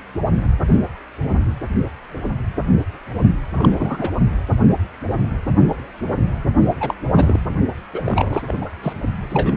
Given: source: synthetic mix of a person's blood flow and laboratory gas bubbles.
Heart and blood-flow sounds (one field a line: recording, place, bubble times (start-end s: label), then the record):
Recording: Doppler ultrasound of blood flow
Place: precordium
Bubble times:
3.50-4.10 s: bubbles
6.80-6.94 s: bubbles
7.11-7.40 s: bubbles
7.49-7.58 s: bubbles
7.93-8.41 s: bubbles
8.47-8.56 s: bubbles
8.61-8.69 s: bubbles
8.83-8.93 s: bubbles
9.29-9.52 s: bubbles
From the record:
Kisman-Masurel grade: 222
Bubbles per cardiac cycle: several, 3 to 8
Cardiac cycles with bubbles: 10 to 50%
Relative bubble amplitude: moderate (0.250 to 0.450)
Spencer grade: 2 (many but less than half of the cardiac periods contain bubble signals, singularly or in groups)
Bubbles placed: only in the low amplitude regions of the cardiac cycle